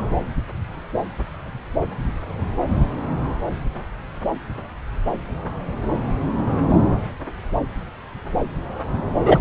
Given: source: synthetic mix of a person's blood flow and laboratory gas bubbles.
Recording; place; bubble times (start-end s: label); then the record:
Doppler ultrasound of blood flow; subclavian vein
9.25-9.38 s: bubbles
From the record:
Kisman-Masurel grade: 113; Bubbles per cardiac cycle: 1 to 2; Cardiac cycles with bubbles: 1 to 10%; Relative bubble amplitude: loud (0.450 to 0.775); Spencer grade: 1 (occasional bubble signal discernible with the cardiac motion signal, with majority of cardiac periods free of bubbles); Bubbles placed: anywhere in the cardiac cycle